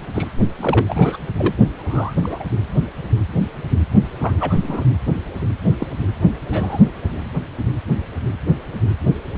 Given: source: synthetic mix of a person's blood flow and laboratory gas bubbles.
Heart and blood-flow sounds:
Doppler ultrasound of blood flow; precordium
0.14-0.28 s: bubbles
0.57-1.17 s: bubbles
1.37-1.55 s: bubbles
1.75-2.45 s: bubbles
4.19-4.33 s: bubbles
4.40-4.85 s: bubbles
5.79-5.87 s: bubbles
6.50-6.80 s: bubbles
From the record:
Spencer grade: 2 (many but less than half of the cardiac periods contain bubble signals, singularly or in groups); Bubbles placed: only in the low amplitude regions of the cardiac cycle

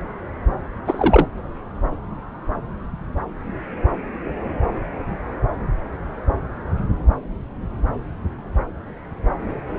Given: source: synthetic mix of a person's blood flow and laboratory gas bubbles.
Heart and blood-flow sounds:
Doppler ultrasound of blood flow; subclavian vein
0.85-1.27 s: bubbles
From the record:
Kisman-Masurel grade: 213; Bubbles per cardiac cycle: several, 3 to 8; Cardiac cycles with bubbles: 1 to 10%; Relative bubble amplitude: loud (0.450 to 0.775); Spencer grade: 1 (occasional bubble signal discernible with the cardiac motion signal, with majority of cardiac periods free of bubbles); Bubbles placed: anywhere in the cardiac cycle

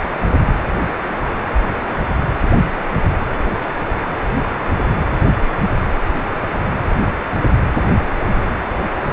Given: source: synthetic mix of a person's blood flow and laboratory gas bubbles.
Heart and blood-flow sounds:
Doppler ultrasound of blood flow; precordium
9.10-9.13 s: bubbles
From the record:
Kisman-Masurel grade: 213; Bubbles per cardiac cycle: several, 3 to 8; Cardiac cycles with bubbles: 1 to 10%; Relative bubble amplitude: loud (0.450 to 0.775); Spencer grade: 1 (occasional bubble signal discernible with the cardiac motion signal, with majority of cardiac periods free of bubbles); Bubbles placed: anywhere in the cardiac cycle

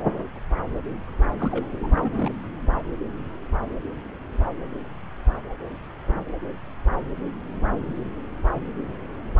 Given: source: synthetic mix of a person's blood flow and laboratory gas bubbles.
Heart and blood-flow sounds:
Doppler ultrasound of blood flow; subclavian vein
1.19-1.23 s: bubbles
1.38-1.67 s: bubbles
1.83-1.88 s: bubbles
1.91-2.31 s: bubbles
From the record:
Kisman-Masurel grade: 211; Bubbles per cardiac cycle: several, 3 to 8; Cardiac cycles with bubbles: 1 to 10%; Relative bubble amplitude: barely perceptible (0.100 to 0.250); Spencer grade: 1 (occasional bubble signal discernible with the cardiac motion signal, with majority of cardiac periods free of bubbles); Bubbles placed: anywhere in the cardiac cycle

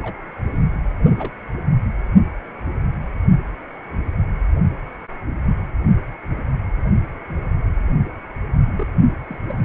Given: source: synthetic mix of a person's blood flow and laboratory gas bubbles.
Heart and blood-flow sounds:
Doppler ultrasound of blood flow; precordium
0.02-0.14 s: bubbles
0.52-0.64 s: bubbles
1.15-1.31 s: bubbles
8.79-8.87 s: bubbles
9.28-9.38 s: bubbles
9.48-9.54 s: bubbles
From the record:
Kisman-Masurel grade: 221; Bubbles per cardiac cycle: several, 3 to 8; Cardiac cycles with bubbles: 10 to 50%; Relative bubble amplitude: barely perceptible (0.100 to 0.250); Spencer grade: 2 (many but less than half of the cardiac periods contain bubble signals, singularly or in groups); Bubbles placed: only in the low amplitude regions of the cardiac cycle

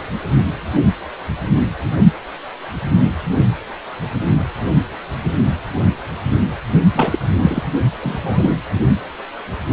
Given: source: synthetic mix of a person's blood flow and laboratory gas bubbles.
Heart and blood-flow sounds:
Doppler ultrasound of blood flow; precordium
6.92-7.19 s: bubbles
7.42-7.63 s: bubbles
8.01-8.62 s: bubbles
From the record:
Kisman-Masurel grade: 222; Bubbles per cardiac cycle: several, 3 to 8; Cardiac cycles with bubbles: 10 to 50%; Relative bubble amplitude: moderate (0.250 to 0.450); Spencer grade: 2 (many but less than half of the cardiac periods contain bubble signals, singularly or in groups); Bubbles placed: only in the low amplitude regions of the cardiac cycle

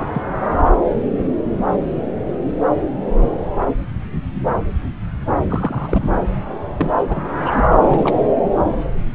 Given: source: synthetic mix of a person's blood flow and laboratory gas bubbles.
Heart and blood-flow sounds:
Doppler ultrasound of blood flow; subclavian vein
0.00-0.22 s: bubbles
5.50-6.09 s: bubbles
6.77-6.91 s: bubbles
7.08-7.23 s: bubbles
7.38-7.63 s: bubbles
7.82-8.19 s: bubbles
From the record:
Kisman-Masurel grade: 222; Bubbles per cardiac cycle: several, 3 to 8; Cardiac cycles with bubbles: 10 to 50%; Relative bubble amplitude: moderate (0.250 to 0.450); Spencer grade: 2 (many but less than half of the cardiac periods contain bubble signals, singularly or in groups); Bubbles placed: anywhere in the cardiac cycle

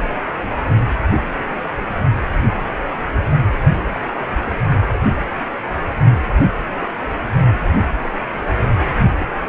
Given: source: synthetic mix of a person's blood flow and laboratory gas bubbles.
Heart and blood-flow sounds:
Doppler ultrasound of blood flow; precordium
3.92-4.00 s: bubbles
4.29-4.38 s: bubbles
From the record:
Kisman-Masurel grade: 111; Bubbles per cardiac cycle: 1 to 2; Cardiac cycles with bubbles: 1 to 10%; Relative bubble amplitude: barely perceptible (0.100 to 0.250); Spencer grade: 1 (occasional bubble signal discernible with the cardiac motion signal, with majority of cardiac periods free of bubbles); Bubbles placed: anywhere in the cardiac cycle

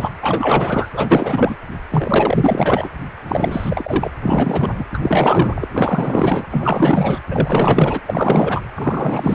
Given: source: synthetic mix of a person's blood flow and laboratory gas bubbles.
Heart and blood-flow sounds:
Doppler ultrasound of blood flow; precordium
0.00-0.10 s: bubbles
0.23-0.89 s: bubbles
0.93-1.56 s: bubbles
1.90-2.90 s: bubbles
3.27-4.10 s: bubbles
4.22-4.84 s: bubbles
4.93-4.98 s: bubbles
5.01-5.67 s: bubbles
5.72-6.46 s: bubbles
6.51-7.20 s: bubbles
7.30-8.02 s: bubbles
8.06-8.62 s: bubbles
8.75-9.35 s: bubbles
From the record:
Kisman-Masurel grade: 444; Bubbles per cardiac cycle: continuous sound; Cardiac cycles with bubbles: 100%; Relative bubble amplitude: maximal (0.775 to 0.999); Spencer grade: 4 (maximum detectable bubble signal sounding continuously throughout systole and diastole of every cardiac period, and overriding the amplitude of the normal cardiac signals); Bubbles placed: anywhere in the cardiac cycle

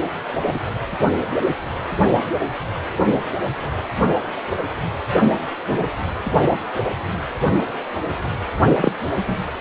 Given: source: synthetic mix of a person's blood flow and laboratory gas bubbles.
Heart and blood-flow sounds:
Doppler ultrasound of blood flow; precordium
0.46-0.59 s: bubbles
5.68-5.87 s: bubbles
8.80-8.92 s: bubbles
9.15-9.36 s: bubbles
From the record:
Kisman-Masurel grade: 123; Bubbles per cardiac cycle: 1 to 2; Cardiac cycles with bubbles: 10 to 50%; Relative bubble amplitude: loud (0.450 to 0.775); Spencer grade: 2 (many but less than half of the cardiac periods contain bubble signals, singularly or in groups); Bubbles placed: only in the low amplitude regions of the cardiac cycle

